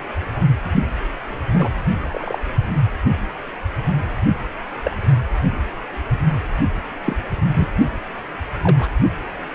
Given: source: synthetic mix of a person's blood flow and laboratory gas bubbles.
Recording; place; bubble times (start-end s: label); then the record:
Doppler ultrasound of blood flow; precordium
1.53-1.70 s: bubbles
2.00-2.40 s: bubbles
4.84-4.97 s: bubbles
7.05-7.16 s: bubbles
7.54-7.68 s: bubbles
8.63-8.91 s: bubbles
From the record:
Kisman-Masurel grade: 122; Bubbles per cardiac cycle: 1 to 2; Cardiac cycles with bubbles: 10 to 50%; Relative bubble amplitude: moderate (0.250 to 0.450); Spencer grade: 2 (many but less than half of the cardiac periods contain bubble signals, singularly or in groups); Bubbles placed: only in the low amplitude regions of the cardiac cycle